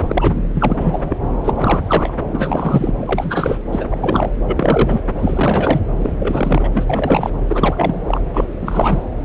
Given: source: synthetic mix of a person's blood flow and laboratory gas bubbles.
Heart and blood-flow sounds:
Doppler ultrasound of blood flow; subclavian vein
0.00-0.41 s: bubbles
0.54-0.77 s: bubbles
0.80-1.18 s: bubbles
1.44-1.51 s: bubbles
1.55-2.13 s: bubbles
2.32-2.93 s: bubbles
2.99-3.58 s: bubbles
3.72-3.85 s: bubbles
3.90-3.97 s: bubbles
4.01-4.30 s: bubbles
4.45-5.03 s: bubbles
5.19-5.80 s: bubbles
5.97-7.30 s: bubbles
7.48-8.01 s: bubbles
8.06-8.21 s: bubbles
8.33-8.45 s: bubbles
8.62-9.02 s: bubbles
From the record:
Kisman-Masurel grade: 343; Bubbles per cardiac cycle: rolling drumbeat, 9 or more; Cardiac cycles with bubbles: 100%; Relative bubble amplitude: loud (0.450 to 0.775); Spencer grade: 3 (all of the cardiac periods contain showers or single bubble signals, but not dominating or overriding the cardiac motion signals); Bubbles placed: anywhere in the cardiac cycle

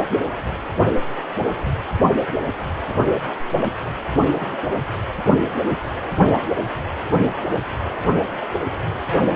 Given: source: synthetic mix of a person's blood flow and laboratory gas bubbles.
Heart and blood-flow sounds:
Doppler ultrasound of blood flow; precordium
3.60-3.71 s: bubbles
4.38-4.76 s: bubbles
From the record:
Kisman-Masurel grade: 121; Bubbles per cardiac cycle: 1 to 2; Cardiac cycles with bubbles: 10 to 50%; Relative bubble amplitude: barely perceptible (0.100 to 0.250); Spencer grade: 2 (many but less than half of the cardiac periods contain bubble signals, singularly or in groups); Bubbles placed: only in the low amplitude regions of the cardiac cycle

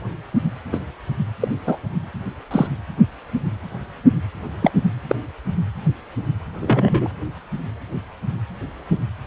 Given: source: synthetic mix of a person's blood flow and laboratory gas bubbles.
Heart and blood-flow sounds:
Doppler ultrasound of blood flow; precordium
0.72-0.78 s: bubbles
1.41-1.48 s: bubbles
1.67-1.77 s: bubbles
2.50-2.67 s: bubbles
4.62-4.71 s: bubbles
5.08-5.15 s: bubbles
6.60-7.10 s: bubbles
From the record:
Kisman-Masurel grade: 123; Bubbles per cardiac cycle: 1 to 2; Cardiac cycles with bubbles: 10 to 50%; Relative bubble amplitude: loud (0.450 to 0.775); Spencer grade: 2 (many but less than half of the cardiac periods contain bubble signals, singularly or in groups); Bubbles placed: anywhere in the cardiac cycle

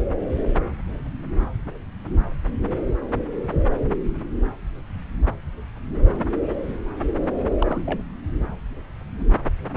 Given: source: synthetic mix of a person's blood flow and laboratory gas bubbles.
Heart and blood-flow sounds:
Doppler ultrasound of blood flow; subclavian vein
7.60-8.02 s: bubbles
From the record:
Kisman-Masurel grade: 211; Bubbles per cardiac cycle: several, 3 to 8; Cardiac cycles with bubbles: 1 to 10%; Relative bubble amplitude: barely perceptible (0.100 to 0.250); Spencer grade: 1 (occasional bubble signal discernible with the cardiac motion signal, with majority of cardiac periods free of bubbles); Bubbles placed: anywhere in the cardiac cycle

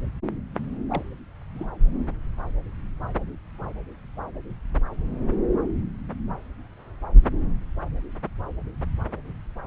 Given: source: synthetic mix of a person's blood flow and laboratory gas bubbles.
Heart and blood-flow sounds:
Doppler ultrasound of blood flow; subclavian vein
0.89-1.03 s: bubbles
1.55-1.67 s: bubbles
From the record:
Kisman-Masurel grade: 111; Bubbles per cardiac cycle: 1 to 2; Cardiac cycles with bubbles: 1 to 10%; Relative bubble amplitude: barely perceptible (0.100 to 0.250); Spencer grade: 1 (occasional bubble signal discernible with the cardiac motion signal, with majority of cardiac periods free of bubbles); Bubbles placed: anywhere in the cardiac cycle

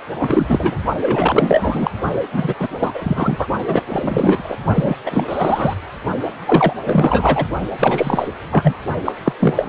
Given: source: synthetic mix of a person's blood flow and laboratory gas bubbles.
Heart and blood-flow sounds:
Doppler ultrasound of blood flow; precordium
0.18-0.75 s: bubbles
1.01-1.91 s: bubbles
2.32-2.54 s: bubbles
2.59-2.69 s: bubbles
2.79-2.92 s: bubbles
2.94-3.47 s: bubbles
3.67-3.83 s: bubbles
3.89-4.57 s: bubbles
4.75-4.96 s: bubbles
5.05-5.74 s: bubbles
6.46-6.73 s: bubbles
6.84-7.47 s: bubbles
7.79-8.28 s: bubbles
8.51-8.76 s: bubbles
9.04-9.12 s: bubbles
9.24-9.33 s: bubbles
9.39-9.69 s: bubbles
From the record:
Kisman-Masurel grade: 343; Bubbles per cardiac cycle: rolling drumbeat, 9 or more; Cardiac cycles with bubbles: 100%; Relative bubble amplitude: loud (0.450 to 0.775); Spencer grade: 3 (all of the cardiac periods contain showers or single bubble signals, but not dominating or overriding the cardiac motion signals); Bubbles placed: only in the low amplitude regions of the cardiac cycle

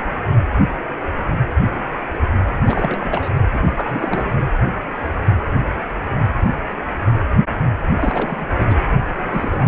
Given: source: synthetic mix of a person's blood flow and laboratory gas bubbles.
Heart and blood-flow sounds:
Doppler ultrasound of blood flow; precordium
2.65-3.29 s: bubbles
3.53-3.60 s: bubbles
3.65-4.43 s: bubbles
8.01-8.48 s: bubbles
8.58-8.77 s: bubbles
9.10-9.68 s: bubbles
From the record:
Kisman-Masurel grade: 332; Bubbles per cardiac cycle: rolling drumbeat, 9 or more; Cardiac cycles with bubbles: 50 to 99%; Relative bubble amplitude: moderate (0.250 to 0.450); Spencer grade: 3 (all of the cardiac periods contain showers or single bubble signals, but not dominating or overriding the cardiac motion signals); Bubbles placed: anywhere in the cardiac cycle

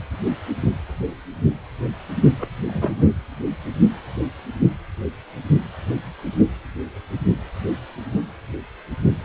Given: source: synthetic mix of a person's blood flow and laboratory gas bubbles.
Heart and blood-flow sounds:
Doppler ultrasound of blood flow; precordium
2.38-2.48 s: bubbles
2.67-3.10 s: bubbles
From the record:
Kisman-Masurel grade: 211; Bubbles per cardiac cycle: several, 3 to 8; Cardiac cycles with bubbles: 1 to 10%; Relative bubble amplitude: barely perceptible (0.100 to 0.250); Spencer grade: 1 (occasional bubble signal discernible with the cardiac motion signal, with majority of cardiac periods free of bubbles); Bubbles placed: only in the low amplitude regions of the cardiac cycle

